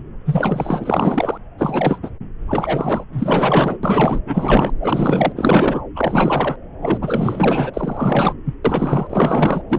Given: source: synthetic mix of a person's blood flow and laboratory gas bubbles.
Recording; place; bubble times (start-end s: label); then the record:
Doppler ultrasound of blood flow; subclavian vein
0.26-1.38 s: bubbles
1.58-1.98 s: bubbles
2.02-2.10 s: bubbles
2.48-3.05 s: bubbles
3.12-3.77 s: bubbles
3.83-4.20 s: bubbles
4.25-4.72 s: bubbles
4.79-5.32 s: bubbles
5.36-5.81 s: bubbles
5.95-6.56 s: bubbles
6.82-6.98 s: bubbles
7.01-7.71 s: bubbles
7.73-8.34 s: bubbles
8.44-8.54 s: bubbles
8.65-9.07 s: bubbles
9.10-9.62 s: bubbles
9.69-9.79 s: bubbles
From the record:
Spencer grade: 4 (maximum detectable bubble signal sounding continuously throughout systole and diastole of every cardiac period, and overriding the amplitude of the normal cardiac signals); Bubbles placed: anywhere in the cardiac cycle